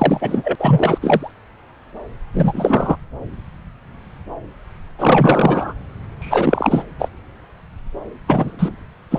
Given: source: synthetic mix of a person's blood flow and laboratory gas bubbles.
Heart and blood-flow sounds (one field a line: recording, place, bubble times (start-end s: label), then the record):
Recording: Doppler ultrasound of blood flow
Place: subclavian vein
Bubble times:
0.00-0.55 s: bubbles
0.59-0.98 s: bubbles
1.01-1.31 s: bubbles
2.34-2.96 s: bubbles
4.98-5.73 s: bubbles
6.19-6.83 s: bubbles
6.98-7.08 s: bubbles
8.28-8.83 s: bubbles
9.11-9.19 s: bubbles
From the record:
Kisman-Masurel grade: 333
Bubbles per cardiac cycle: rolling drumbeat, 9 or more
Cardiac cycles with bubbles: 50 to 99%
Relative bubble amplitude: loud (0.450 to 0.775)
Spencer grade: 3 (all of the cardiac periods contain showers or single bubble signals, but not dominating or overriding the cardiac motion signals)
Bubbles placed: anywhere in the cardiac cycle